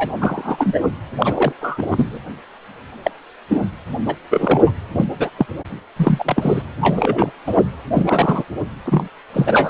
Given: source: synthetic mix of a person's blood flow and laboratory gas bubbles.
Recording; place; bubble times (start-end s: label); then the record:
Doppler ultrasound of blood flow; precordium
0.00-0.14 s: bubbles
0.20-0.81 s: bubbles
1.20-1.53 s: bubbles
1.60-1.87 s: bubbles
1.91-2.19 s: bubbles
3.03-3.11 s: bubbles
3.50-3.62 s: bubbles
4.07-4.16 s: bubbles
4.31-4.73 s: bubbles
4.92-5.05 s: bubbles
5.18-5.30 s: bubbles
5.37-5.46 s: bubbles
5.96-6.62 s: bubbles
6.79-7.32 s: bubbles
7.46-7.63 s: bubbles
7.93-8.44 s: bubbles
8.85-9.08 s: bubbles
9.33-9.70 s: bubbles
From the record:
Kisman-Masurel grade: 243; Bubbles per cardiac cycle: several, 3 to 8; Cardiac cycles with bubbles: 100%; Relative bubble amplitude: loud (0.450 to 0.775); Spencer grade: 3 (all of the cardiac periods contain showers or single bubble signals, but not dominating or overriding the cardiac motion signals); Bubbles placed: anywhere in the cardiac cycle